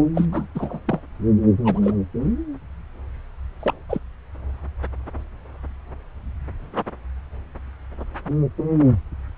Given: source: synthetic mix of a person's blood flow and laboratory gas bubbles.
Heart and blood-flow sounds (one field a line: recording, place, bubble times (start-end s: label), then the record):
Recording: Doppler ultrasound of blood flow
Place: subclavian vein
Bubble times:
0.14-0.27 s: bubbles
0.32-0.46 s: bubbles
0.55-0.80 s: bubbles
0.85-1.01 s: bubbles
1.65-1.80 s: bubbles
1.83-1.98 s: bubbles
3.60-3.74 s: bubbles
3.89-3.98 s: bubbles
From the record:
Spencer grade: 2 (many but less than half of the cardiac periods contain bubble signals, singularly or in groups)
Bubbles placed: anywhere in the cardiac cycle